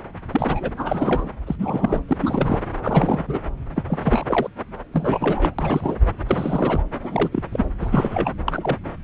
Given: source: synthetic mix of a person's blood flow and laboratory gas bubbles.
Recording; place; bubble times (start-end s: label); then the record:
Doppler ultrasound of blood flow; subclavian vein
0.32-0.69 s: bubbles
0.78-1.31 s: bubbles
1.47-1.56 s: bubbles
1.59-2.00 s: bubbles
2.08-2.17 s: bubbles
2.20-2.60 s: bubbles
2.82-3.39 s: bubbles
3.75-3.83 s: bubbles
3.87-3.99 s: bubbles
4.02-4.23 s: bubbles
4.28-4.49 s: bubbles
4.93-5.54 s: bubbles
5.58-5.98 s: bubbles
6.27-6.82 s: bubbles
7.03-7.29 s: bubbles
7.32-7.43 s: bubbles
7.52-7.64 s: bubbles
7.80-8.31 s: bubbles
8.48-8.78 s: bubbles
From the record:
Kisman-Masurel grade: 242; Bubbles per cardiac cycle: several, 3 to 8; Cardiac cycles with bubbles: 100%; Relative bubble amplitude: moderate (0.250 to 0.450); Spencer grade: 3 (all of the cardiac periods contain showers or single bubble signals, but not dominating or overriding the cardiac motion signals); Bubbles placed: anywhere in the cardiac cycle